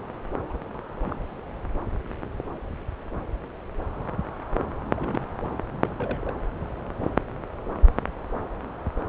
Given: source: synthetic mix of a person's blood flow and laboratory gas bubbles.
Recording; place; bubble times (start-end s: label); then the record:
Doppler ultrasound of blood flow; subclavian vein
0.49-0.57 s: bubbles
0.74-0.78 s: bubbles
1.04-1.15 s: bubbles
4.95-5.26 s: bubbles
5.74-6.33 s: bubbles
From the record:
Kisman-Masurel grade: 221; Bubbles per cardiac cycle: several, 3 to 8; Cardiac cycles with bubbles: 10 to 50%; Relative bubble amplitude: barely perceptible (0.100 to 0.250); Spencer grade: 2 (many but less than half of the cardiac periods contain bubble signals, singularly or in groups); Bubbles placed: anywhere in the cardiac cycle